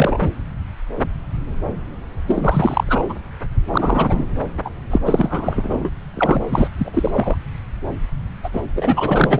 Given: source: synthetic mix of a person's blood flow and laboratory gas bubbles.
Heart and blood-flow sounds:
Doppler ultrasound of blood flow; subclavian vein
0.00-0.28 s: bubbles
2.28-3.16 s: bubbles
3.71-4.25 s: bubbles
4.65-4.70 s: bubbles
4.91-4.98 s: bubbles
5.04-5.90 s: bubbles
6.13-6.46 s: bubbles
6.51-6.67 s: bubbles
6.78-7.36 s: bubbles
8.43-8.50 s: bubbles
8.53-8.61 s: bubbles
8.76-9.40 s: bubbles
From the record:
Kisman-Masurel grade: 333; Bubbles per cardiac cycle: rolling drumbeat, 9 or more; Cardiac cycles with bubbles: 50 to 99%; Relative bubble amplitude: loud (0.450 to 0.775); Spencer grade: 3 (all of the cardiac periods contain showers or single bubble signals, but not dominating or overriding the cardiac motion signals); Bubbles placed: anywhere in the cardiac cycle

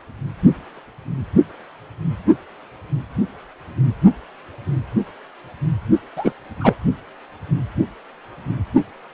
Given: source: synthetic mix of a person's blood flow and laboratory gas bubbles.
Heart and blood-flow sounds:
Doppler ultrasound of blood flow; precordium
6.16-6.32 s: bubbles
6.60-6.74 s: bubbles
From the record:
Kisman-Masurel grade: 213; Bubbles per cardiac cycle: several, 3 to 8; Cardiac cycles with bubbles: 1 to 10%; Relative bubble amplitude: loud (0.450 to 0.775); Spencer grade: 1 (occasional bubble signal discernible with the cardiac motion signal, with majority of cardiac periods free of bubbles); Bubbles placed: only in the low amplitude regions of the cardiac cycle

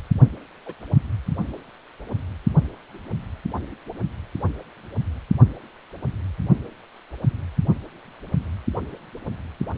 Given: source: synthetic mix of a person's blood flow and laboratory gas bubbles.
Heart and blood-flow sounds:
Doppler ultrasound of blood flow; precordium
0.66-0.73 s: bubbles
From the record:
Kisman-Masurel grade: 111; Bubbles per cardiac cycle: 1 to 2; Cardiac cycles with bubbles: 1 to 10%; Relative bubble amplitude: barely perceptible (0.100 to 0.250); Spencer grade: 1 (occasional bubble signal discernible with the cardiac motion signal, with majority of cardiac periods free of bubbles); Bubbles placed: only in the low amplitude regions of the cardiac cycle

